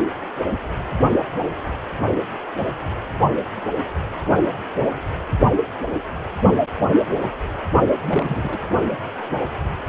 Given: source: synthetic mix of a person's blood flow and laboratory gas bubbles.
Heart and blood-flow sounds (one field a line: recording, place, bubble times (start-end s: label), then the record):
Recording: Doppler ultrasound of blood flow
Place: precordium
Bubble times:
8.07-8.58 s: bubbles
From the record:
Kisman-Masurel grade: 211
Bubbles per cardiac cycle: several, 3 to 8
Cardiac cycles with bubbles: 1 to 10%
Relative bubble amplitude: barely perceptible (0.100 to 0.250)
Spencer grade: 1 (occasional bubble signal discernible with the cardiac motion signal, with majority of cardiac periods free of bubbles)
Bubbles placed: only in the low amplitude regions of the cardiac cycle